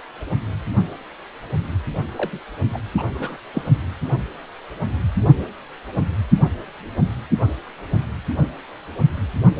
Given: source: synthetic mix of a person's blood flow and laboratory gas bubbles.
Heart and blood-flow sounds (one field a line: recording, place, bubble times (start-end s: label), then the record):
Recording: Doppler ultrasound of blood flow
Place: precordium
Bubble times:
2.17-2.39 s: bubbles
2.73-2.79 s: bubbles
2.97-3.03 s: bubbles
3.14-3.37 s: bubbles
3.54-3.62 s: bubbles
From the record:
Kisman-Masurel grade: 211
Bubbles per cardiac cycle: several, 3 to 8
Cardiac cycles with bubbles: 1 to 10%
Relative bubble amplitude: barely perceptible (0.100 to 0.250)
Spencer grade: 1 (occasional bubble signal discernible with the cardiac motion signal, with majority of cardiac periods free of bubbles)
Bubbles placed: only in the low amplitude regions of the cardiac cycle